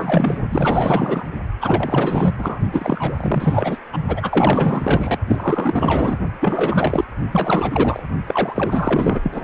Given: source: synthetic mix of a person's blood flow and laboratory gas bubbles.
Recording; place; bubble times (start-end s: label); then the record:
Doppler ultrasound of blood flow; precordium
0.00-0.39 s: bubbles
0.49-1.27 s: bubbles
1.60-2.35 s: bubbles
2.38-2.60 s: bubbles
2.73-3.77 s: bubbles
3.92-3.98 s: bubbles
4.07-5.19 s: bubbles
5.27-6.17 s: bubbles
6.41-7.04 s: bubbles
7.31-8.02 s: bubbles
8.26-9.20 s: bubbles
9.23-9.41 s: bubbles
From the record:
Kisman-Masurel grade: 444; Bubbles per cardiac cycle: continuous sound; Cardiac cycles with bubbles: 100%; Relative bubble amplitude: maximal (0.775 to 0.999); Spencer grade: 4 (maximum detectable bubble signal sounding continuously throughout systole and diastole of every cardiac period, and overriding the amplitude of the normal cardiac signals); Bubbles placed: only in the low amplitude regions of the cardiac cycle